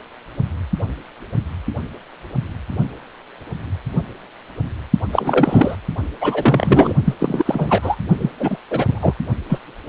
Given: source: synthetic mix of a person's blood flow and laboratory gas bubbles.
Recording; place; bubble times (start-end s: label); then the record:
Doppler ultrasound of blood flow; precordium
5.12-5.76 s: bubbles
6.21-6.94 s: bubbles
7.05-7.17 s: bubbles
7.20-7.96 s: bubbles
8.18-8.30 s: bubbles
8.39-8.57 s: bubbles
8.70-9.13 s: bubbles
9.49-9.59 s: bubbles
From the record:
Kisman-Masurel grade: 333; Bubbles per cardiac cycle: rolling drumbeat, 9 or more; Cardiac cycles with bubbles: 50 to 99%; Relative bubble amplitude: loud (0.450 to 0.775); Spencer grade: 3 (all of the cardiac periods contain showers or single bubble signals, but not dominating or overriding the cardiac motion signals); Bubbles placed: only in the low amplitude regions of the cardiac cycle